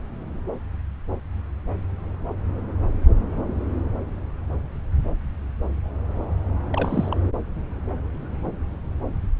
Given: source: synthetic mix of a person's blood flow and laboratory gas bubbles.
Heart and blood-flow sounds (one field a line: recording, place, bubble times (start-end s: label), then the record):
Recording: Doppler ultrasound of blood flow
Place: subclavian vein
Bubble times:
6.72-7.17 s: bubbles
From the record:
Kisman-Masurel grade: 211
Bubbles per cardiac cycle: several, 3 to 8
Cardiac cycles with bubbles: 1 to 10%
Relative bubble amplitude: barely perceptible (0.100 to 0.250)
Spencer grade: 1 (occasional bubble signal discernible with the cardiac motion signal, with majority of cardiac periods free of bubbles)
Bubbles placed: anywhere in the cardiac cycle